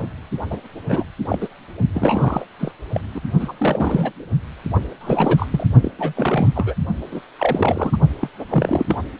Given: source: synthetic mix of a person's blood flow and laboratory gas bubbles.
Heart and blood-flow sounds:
Doppler ultrasound of blood flow; precordium
0.00-0.07 s: bubbles
0.50-0.57 s: bubbles
0.88-1.04 s: bubbles
1.29-1.48 s: bubbles
1.92-2.46 s: bubbles
2.59-2.71 s: bubbles
2.92-3.00 s: bubbles
3.15-3.21 s: bubbles
3.40-3.52 s: bubbles
3.59-4.12 s: bubbles
5.00-5.47 s: bubbles
5.51-5.67 s: bubbles
5.82-5.92 s: bubbles
5.99-6.13 s: bubbles
6.16-6.47 s: bubbles
6.55-6.75 s: bubbles
7.12-7.21 s: bubbles
7.39-7.97 s: bubbles
8.19-8.28 s: bubbles
8.39-8.45 s: bubbles
8.49-8.97 s: bubbles
From the record:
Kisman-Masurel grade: 342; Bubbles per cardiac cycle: rolling drumbeat, 9 or more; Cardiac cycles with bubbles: 100%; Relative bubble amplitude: moderate (0.250 to 0.450); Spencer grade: 3 (all of the cardiac periods contain showers or single bubble signals, but not dominating or overriding the cardiac motion signals); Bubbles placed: only in the low amplitude regions of the cardiac cycle

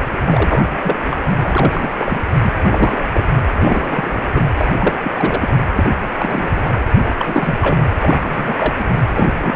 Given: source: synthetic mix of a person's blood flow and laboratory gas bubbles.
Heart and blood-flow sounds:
Doppler ultrasound of blood flow; precordium
0.26-0.65 s: bubbles
0.84-0.96 s: bubbles
1.10-1.16 s: bubbles
1.44-2.21 s: bubbles
2.43-2.52 s: bubbles
2.61-2.98 s: bubbles
3.14-3.24 s: bubbles
3.54-4.24 s: bubbles
4.32-4.45 s: bubbles
4.58-4.74 s: bubbles
4.79-4.94 s: bubbles
5.03-5.11 s: bubbles
5.14-5.49 s: bubbles
5.75-5.91 s: bubbles
6.18-6.79 s: bubbles
6.97-7.03 s: bubbles
7.17-7.58 s: bubbles
7.61-7.86 s: bubbles
7.99-8.73 s: bubbles
8.78-8.84 s: bubbles
9.09-9.28 s: bubbles
9.41-9.55 s: bubbles
From the record:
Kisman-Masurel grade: 342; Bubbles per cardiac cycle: rolling drumbeat, 9 or more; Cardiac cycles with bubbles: 100%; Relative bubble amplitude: moderate (0.250 to 0.450); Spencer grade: 3 (all of the cardiac periods contain showers or single bubble signals, but not dominating or overriding the cardiac motion signals); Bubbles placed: anywhere in the cardiac cycle

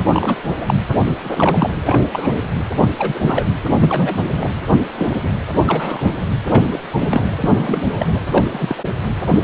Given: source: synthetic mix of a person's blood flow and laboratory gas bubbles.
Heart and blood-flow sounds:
Doppler ultrasound of blood flow; precordium
0.04-0.35 s: bubbles
0.60-0.74 s: bubbles
1.04-1.12 s: bubbles
1.24-1.82 s: bubbles
1.84-2.04 s: bubbles
2.12-2.51 s: bubbles
2.98-3.45 s: bubbles
3.80-4.23 s: bubbles
4.31-4.49 s: bubbles
4.96-5.30 s: bubbles
5.67-6.27 s: bubbles
6.51-6.79 s: bubbles
6.90-7.34 s: bubbles
7.40-8.20 s: bubbles
8.31-8.83 s: bubbles
From the record:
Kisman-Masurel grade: 243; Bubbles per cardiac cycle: several, 3 to 8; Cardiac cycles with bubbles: 100%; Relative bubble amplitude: loud (0.450 to 0.775); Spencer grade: 3 (all of the cardiac periods contain showers or single bubble signals, but not dominating or overriding the cardiac motion signals); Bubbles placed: anywhere in the cardiac cycle

